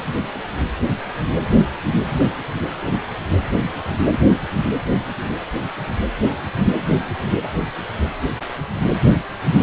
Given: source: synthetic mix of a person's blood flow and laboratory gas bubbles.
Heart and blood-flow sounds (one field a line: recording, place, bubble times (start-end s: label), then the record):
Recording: Doppler ultrasound of blood flow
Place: precordium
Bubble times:
no bubbles
From the record:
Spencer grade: 0 (complete lack of bubble signals)